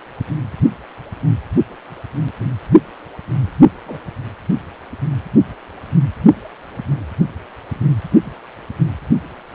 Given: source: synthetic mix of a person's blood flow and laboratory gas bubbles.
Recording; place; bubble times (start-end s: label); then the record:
Doppler ultrasound of blood flow; precordium
3.47-3.51 s: bubbles
3.85-3.99 s: bubbles
6.90-7.00 s: bubbles
8.23-8.31 s: bubbles
From the record:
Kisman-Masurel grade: 121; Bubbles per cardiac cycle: 1 to 2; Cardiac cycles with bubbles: 10 to 50%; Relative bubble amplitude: barely perceptible (0.100 to 0.250); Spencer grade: 2 (many but less than half of the cardiac periods contain bubble signals, singularly or in groups); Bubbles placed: only in the low amplitude regions of the cardiac cycle